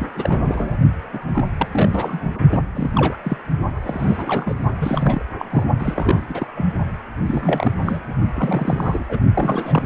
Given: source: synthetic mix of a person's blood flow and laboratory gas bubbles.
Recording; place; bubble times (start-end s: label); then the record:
Doppler ultrasound of blood flow; precordium
0.00-0.07 s: bubbles
0.15-0.76 s: bubbles
1.12-1.19 s: bubbles
1.33-1.51 s: bubbles
1.57-1.68 s: bubbles
1.71-2.40 s: bubbles
2.51-2.62 s: bubbles
2.75-2.90 s: bubbles
2.93-3.16 s: bubbles
3.23-3.38 s: bubbles
3.81-4.55 s: bubbles
4.78-5.22 s: bubbles
5.39-5.64 s: bubbles
5.80-6.22 s: bubbles
6.28-6.48 s: bubbles
6.55-6.69 s: bubbles
7.26-7.73 s: bubbles
7.82-8.00 s: bubbles
8.35-9.04 s: bubbles
9.08-9.20 s: bubbles
9.33-9.86 s: bubbles
From the record:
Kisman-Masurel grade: 342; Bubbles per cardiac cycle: rolling drumbeat, 9 or more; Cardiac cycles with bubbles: 100%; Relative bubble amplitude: moderate (0.250 to 0.450); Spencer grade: 3 (all of the cardiac periods contain showers or single bubble signals, but not dominating or overriding the cardiac motion signals); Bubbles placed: only in the low amplitude regions of the cardiac cycle